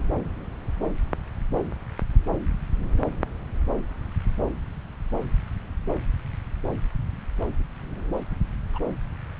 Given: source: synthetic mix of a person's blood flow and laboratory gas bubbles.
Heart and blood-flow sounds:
Doppler ultrasound of blood flow; subclavian vein
8.73-8.79 s: bubbles
From the record:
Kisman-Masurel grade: 111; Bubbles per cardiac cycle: 1 to 2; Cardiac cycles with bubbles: 1 to 10%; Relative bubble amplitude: barely perceptible (0.100 to 0.250); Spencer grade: 1 (occasional bubble signal discernible with the cardiac motion signal, with majority of cardiac periods free of bubbles); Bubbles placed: anywhere in the cardiac cycle

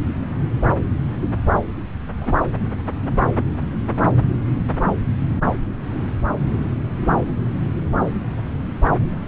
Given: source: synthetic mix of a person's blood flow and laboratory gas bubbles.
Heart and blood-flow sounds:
Doppler ultrasound of blood flow; subclavian vein
2.17-2.34 s: bubbles
From the record:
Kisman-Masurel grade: 112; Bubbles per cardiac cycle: 1 to 2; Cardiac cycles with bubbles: 1 to 10%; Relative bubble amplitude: moderate (0.250 to 0.450); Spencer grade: 1 (occasional bubble signal discernible with the cardiac motion signal, with majority of cardiac periods free of bubbles); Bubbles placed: anywhere in the cardiac cycle

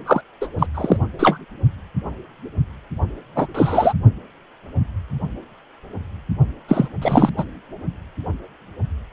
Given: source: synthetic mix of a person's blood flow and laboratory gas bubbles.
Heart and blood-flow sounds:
Doppler ultrasound of blood flow; precordium
0.06-0.21 s: bubbles
0.41-0.47 s: bubbles
0.58-0.66 s: bubbles
0.74-0.96 s: bubbles
1.19-1.38 s: bubbles
3.35-3.47 s: bubbles
3.54-3.93 s: bubbles
6.68-6.88 s: bubbles
7.01-7.29 s: bubbles
7.37-7.44 s: bubbles
From the record:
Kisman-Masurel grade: 233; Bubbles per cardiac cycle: several, 3 to 8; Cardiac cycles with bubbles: 50 to 99%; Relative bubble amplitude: loud (0.450 to 0.775); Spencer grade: 3 (all of the cardiac periods contain showers or single bubble signals, but not dominating or overriding the cardiac motion signals); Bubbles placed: only in the low amplitude regions of the cardiac cycle

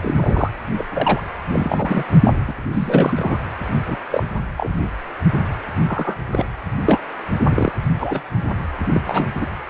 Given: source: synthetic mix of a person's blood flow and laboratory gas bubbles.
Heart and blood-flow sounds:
Doppler ultrasound of blood flow; precordium
0.01-0.52 s: bubbles
0.78-0.84 s: bubbles
0.93-1.21 s: bubbles
1.51-2.04 s: bubbles
2.23-2.33 s: bubbles
2.47-2.54 s: bubbles
2.73-3.38 s: bubbles
3.85-3.98 s: bubbles
4.10-4.23 s: bubbles
4.56-4.71 s: bubbles
5.88-6.25 s: bubbles
6.32-6.46 s: bubbles
6.88-7.00 s: bubbles
7.38-7.72 s: bubbles
7.99-8.23 s: bubbles
8.93-9.01 s: bubbles
9.07-9.32 s: bubbles
9.41-9.46 s: bubbles
From the record:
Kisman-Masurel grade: 243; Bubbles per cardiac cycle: several, 3 to 8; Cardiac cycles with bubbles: 100%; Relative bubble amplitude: loud (0.450 to 0.775); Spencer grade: 3 (all of the cardiac periods contain showers or single bubble signals, but not dominating or overriding the cardiac motion signals); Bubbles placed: anywhere in the cardiac cycle

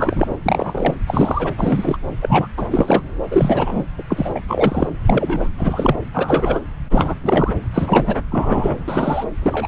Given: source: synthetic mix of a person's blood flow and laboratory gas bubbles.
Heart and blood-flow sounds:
Doppler ultrasound of blood flow; subclavian vein
0.00-0.35 s: bubbles
0.45-0.94 s: bubbles
1.06-1.53 s: bubbles
1.58-1.97 s: bubbles
2.21-2.48 s: bubbles
2.57-3.02 s: bubbles
3.30-3.84 s: bubbles
3.98-4.03 s: bubbles
4.10-4.40 s: bubbles
4.48-4.88 s: bubbles
5.06-5.48 s: bubbles
5.57-5.96 s: bubbles
6.13-6.60 s: bubbles
6.90-7.15 s: bubbles
7.24-7.58 s: bubbles
7.74-8.16 s: bubbles
8.31-8.74 s: bubbles
8.88-9.25 s: bubbles
9.42-9.68 s: bubbles
From the record:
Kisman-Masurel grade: 243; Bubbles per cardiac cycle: several, 3 to 8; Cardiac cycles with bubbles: 100%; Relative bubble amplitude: loud (0.450 to 0.775); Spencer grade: 3 (all of the cardiac periods contain showers or single bubble signals, but not dominating or overriding the cardiac motion signals); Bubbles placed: anywhere in the cardiac cycle

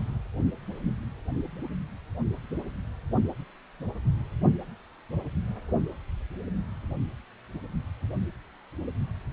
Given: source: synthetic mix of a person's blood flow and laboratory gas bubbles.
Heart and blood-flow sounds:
Doppler ultrasound of blood flow; precordium
no bubbles
From the record:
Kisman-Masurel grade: 000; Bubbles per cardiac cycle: 0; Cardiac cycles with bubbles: 0%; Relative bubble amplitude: no bubbles discernible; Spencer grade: 0 (complete lack of bubble signals)

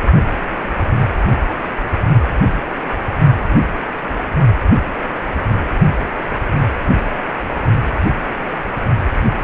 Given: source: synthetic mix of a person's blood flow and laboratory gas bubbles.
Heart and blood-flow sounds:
Doppler ultrasound of blood flow; precordium
no bubbles
From the record:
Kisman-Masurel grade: 000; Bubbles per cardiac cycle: 0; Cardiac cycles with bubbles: 0%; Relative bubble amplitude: no bubbles discernible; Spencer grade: 0 (complete lack of bubble signals)

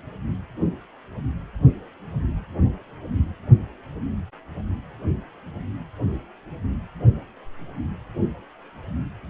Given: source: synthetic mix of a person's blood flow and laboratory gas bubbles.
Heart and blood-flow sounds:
Doppler ultrasound of blood flow; precordium
no bubbles
From the record:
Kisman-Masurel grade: 000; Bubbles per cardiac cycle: 0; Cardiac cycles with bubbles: 0%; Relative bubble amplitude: no bubbles discernible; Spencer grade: 0 (complete lack of bubble signals)

